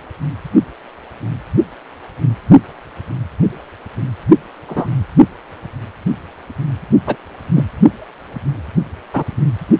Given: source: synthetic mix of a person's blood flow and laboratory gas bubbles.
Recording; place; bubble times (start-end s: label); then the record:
Doppler ultrasound of blood flow; precordium
4.69-4.87 s: bubbles
7.07-7.16 s: bubbles
7.56-7.64 s: bubbles
9.13-9.24 s: bubbles
From the record:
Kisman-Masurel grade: 123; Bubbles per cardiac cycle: 1 to 2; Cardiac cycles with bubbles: 10 to 50%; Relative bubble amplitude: loud (0.450 to 0.775); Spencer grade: 2 (many but less than half of the cardiac periods contain bubble signals, singularly or in groups); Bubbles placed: only in the low amplitude regions of the cardiac cycle